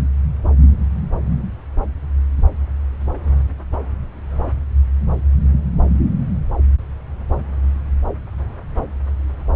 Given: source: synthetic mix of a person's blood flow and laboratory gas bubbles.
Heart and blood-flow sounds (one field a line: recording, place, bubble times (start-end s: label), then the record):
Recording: Doppler ultrasound of blood flow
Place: subclavian vein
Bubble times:
no bubbles
From the record:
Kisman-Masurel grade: 000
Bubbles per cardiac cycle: 0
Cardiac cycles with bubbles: 0%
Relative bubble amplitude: no bubbles discernible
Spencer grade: 0 (complete lack of bubble signals)